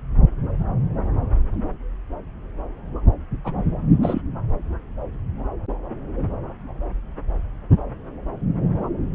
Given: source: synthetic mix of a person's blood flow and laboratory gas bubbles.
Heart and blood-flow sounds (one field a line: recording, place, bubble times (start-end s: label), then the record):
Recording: Doppler ultrasound of blood flow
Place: subclavian vein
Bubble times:
3.44-3.53 s: bubbles
4.02-4.21 s: bubbles
From the record:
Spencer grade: 1 (occasional bubble signal discernible with the cardiac motion signal, with majority of cardiac periods free of bubbles)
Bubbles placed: anywhere in the cardiac cycle